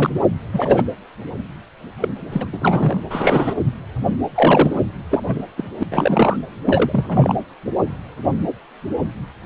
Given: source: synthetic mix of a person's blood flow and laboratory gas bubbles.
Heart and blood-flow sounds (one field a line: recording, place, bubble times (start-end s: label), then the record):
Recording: Doppler ultrasound of blood flow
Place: precordium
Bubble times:
0.00-0.20 s: bubbles
0.53-0.85 s: bubbles
2.00-2.08 s: bubbles
2.32-2.46 s: bubbles
2.53-3.02 s: bubbles
3.10-3.54 s: bubbles
4.34-4.80 s: bubbles
5.10-5.24 s: bubbles
5.26-5.46 s: bubbles
5.57-5.63 s: bubbles
5.79-5.83 s: bubbles
5.91-6.37 s: bubbles
6.66-7.33 s: bubbles
From the record:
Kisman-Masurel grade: 232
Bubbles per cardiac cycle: several, 3 to 8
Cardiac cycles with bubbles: 50 to 99%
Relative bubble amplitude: moderate (0.250 to 0.450)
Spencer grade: 3 (all of the cardiac periods contain showers or single bubble signals, but not dominating or overriding the cardiac motion signals)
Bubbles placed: anywhere in the cardiac cycle